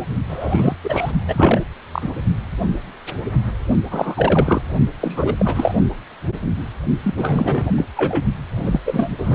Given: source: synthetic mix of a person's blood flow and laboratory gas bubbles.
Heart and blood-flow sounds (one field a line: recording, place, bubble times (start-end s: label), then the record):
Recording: Doppler ultrasound of blood flow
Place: precordium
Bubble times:
0.00-0.05 s: bubbles
0.28-0.76 s: bubbles
0.83-1.11 s: bubbles
1.27-1.64 s: bubbles
1.91-2.11 s: bubbles
3.90-4.62 s: bubbles
5.00-5.75 s: bubbles
7.03-7.72 s: bubbles
7.78-7.87 s: bubbles
7.96-8.25 s: bubbles
8.55-8.80 s: bubbles
8.85-9.11 s: bubbles
9.17-9.35 s: bubbles
From the record:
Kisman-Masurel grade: 333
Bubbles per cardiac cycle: rolling drumbeat, 9 or more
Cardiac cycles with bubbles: 50 to 99%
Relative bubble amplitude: loud (0.450 to 0.775)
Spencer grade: 3 (all of the cardiac periods contain showers or single bubble signals, but not dominating or overriding the cardiac motion signals)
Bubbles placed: only in the low amplitude regions of the cardiac cycle